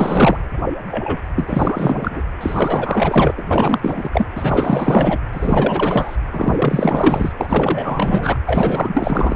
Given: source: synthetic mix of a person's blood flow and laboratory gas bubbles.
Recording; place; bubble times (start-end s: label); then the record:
Doppler ultrasound of blood flow; precordium
0.00-0.37 s: bubbles
0.91-1.18 s: bubbles
1.35-2.22 s: bubbles
2.40-3.34 s: bubbles
3.37-3.42 s: bubbles
3.45-4.09 s: bubbles
4.12-4.26 s: bubbles
4.35-5.18 s: bubbles
5.32-6.17 s: bubbles
6.31-7.33 s: bubbles
7.38-8.39 s: bubbles
8.46-9.36 s: bubbles
From the record:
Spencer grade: 4 (maximum detectable bubble signal sounding continuously throughout systole and diastole of every cardiac period, and overriding the amplitude of the normal cardiac signals); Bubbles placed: anywhere in the cardiac cycle